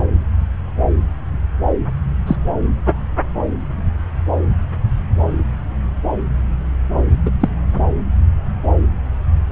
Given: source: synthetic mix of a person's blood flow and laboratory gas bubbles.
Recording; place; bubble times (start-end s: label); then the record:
Doppler ultrasound of blood flow; subclavian vein
2.27-2.35 s: bubbles
7.25-7.31 s: bubbles
7.41-7.49 s: bubbles
From the record:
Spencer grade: 2 (many but less than half of the cardiac periods contain bubble signals, singularly or in groups); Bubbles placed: anywhere in the cardiac cycle